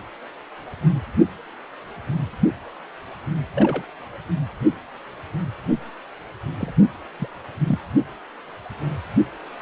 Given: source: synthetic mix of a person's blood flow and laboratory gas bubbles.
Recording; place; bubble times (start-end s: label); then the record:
Doppler ultrasound of blood flow; precordium
3.55-3.83 s: bubbles
6.59-6.72 s: bubbles
7.19-7.29 s: bubbles
7.67-7.79 s: bubbles
From the record:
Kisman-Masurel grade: 121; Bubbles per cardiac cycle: 1 to 2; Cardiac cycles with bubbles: 10 to 50%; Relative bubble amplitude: barely perceptible (0.100 to 0.250); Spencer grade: 2 (many but less than half of the cardiac periods contain bubble signals, singularly or in groups); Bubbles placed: anywhere in the cardiac cycle